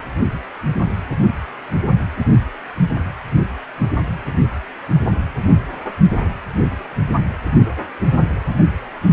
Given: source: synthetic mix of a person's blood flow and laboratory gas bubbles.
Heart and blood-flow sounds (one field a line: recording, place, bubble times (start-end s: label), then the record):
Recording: Doppler ultrasound of blood flow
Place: precordium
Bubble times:
no bubbles
From the record:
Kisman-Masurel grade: 000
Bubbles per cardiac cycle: 0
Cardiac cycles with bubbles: 0%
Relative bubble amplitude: no bubbles discernible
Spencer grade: 0 (complete lack of bubble signals)